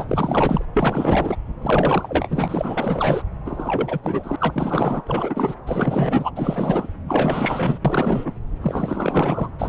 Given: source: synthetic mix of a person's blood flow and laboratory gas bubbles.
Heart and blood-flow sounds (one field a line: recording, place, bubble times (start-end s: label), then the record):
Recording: Doppler ultrasound of blood flow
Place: subclavian vein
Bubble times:
0.00-0.04 s: bubbles
0.09-0.65 s: bubbles
0.73-1.36 s: bubbles
1.61-3.23 s: bubbles
3.45-4.00 s: bubbles
4.03-4.36 s: bubbles
4.38-5.03 s: bubbles
5.06-5.55 s: bubbles
5.66-6.31 s: bubbles
6.35-6.88 s: bubbles
7.08-7.79 s: bubbles
7.84-8.32 s: bubbles
8.62-9.50 s: bubbles
9.58-9.69 s: bubbles
From the record:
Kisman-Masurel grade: 444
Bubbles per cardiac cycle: continuous sound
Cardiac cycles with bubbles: 100%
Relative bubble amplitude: maximal (0.775 to 0.999)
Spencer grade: 4 (maximum detectable bubble signal sounding continuously throughout systole and diastole of every cardiac period, and overriding the amplitude of the normal cardiac signals)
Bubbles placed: anywhere in the cardiac cycle